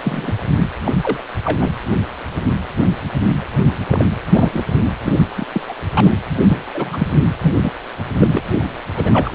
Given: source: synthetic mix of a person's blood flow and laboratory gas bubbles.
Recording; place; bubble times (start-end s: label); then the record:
Doppler ultrasound of blood flow; precordium
0.02-0.35 s: bubbles
0.84-0.95 s: bubbles
1.01-1.20 s: bubbles
1.45-1.58 s: bubbles
1.61-1.71 s: bubbles
3.86-4.05 s: bubbles
4.32-4.64 s: bubbles
5.06-5.12 s: bubbles
5.37-5.45 s: bubbles
5.52-5.61 s: bubbles
5.68-5.76 s: bubbles
5.95-6.10 s: bubbles
6.48-6.63 s: bubbles
6.73-7.07 s: bubbles
7.40-7.71 s: bubbles
8.20-8.43 s: bubbles
8.95-9.35 s: bubbles
From the record:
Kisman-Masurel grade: 232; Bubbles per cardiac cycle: several, 3 to 8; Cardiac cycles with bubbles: 50 to 99%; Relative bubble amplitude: moderate (0.250 to 0.450); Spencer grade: 3 (all of the cardiac periods contain showers or single bubble signals, but not dominating or overriding the cardiac motion signals); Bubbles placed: anywhere in the cardiac cycle